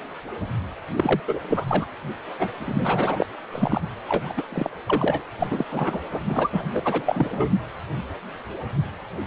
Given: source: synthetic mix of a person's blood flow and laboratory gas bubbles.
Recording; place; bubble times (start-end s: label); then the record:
Doppler ultrasound of blood flow; precordium
0.96-1.20 s: bubbles
1.27-1.40 s: bubbles
1.49-1.65 s: bubbles
1.67-1.85 s: bubbles
2.38-2.50 s: bubbles
2.60-3.26 s: bubbles
3.52-3.80 s: bubbles
4.08-4.33 s: bubbles
4.37-4.42 s: bubbles
4.52-4.70 s: bubbles
4.87-5.26 s: bubbles
5.39-5.47 s: bubbles
5.50-5.65 s: bubbles
5.71-6.00 s: bubbles
6.13-6.20 s: bubbles
6.27-6.50 s: bubbles
6.52-6.64 s: bubbles
6.71-7.49 s: bubbles
From the record:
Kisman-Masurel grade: 332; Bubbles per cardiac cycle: rolling drumbeat, 9 or more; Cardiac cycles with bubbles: 50 to 99%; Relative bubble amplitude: moderate (0.250 to 0.450); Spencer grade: 3 (all of the cardiac periods contain showers or single bubble signals, but not dominating or overriding the cardiac motion signals); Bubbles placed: anywhere in the cardiac cycle